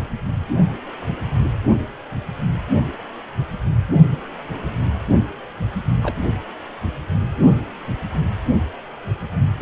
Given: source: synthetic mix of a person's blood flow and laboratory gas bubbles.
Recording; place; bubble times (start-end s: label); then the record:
Doppler ultrasound of blood flow; precordium
6.03-6.16 s: bubbles
From the record:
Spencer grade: 1 (occasional bubble signal discernible with the cardiac motion signal, with majority of cardiac periods free of bubbles); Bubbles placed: only in the low amplitude regions of the cardiac cycle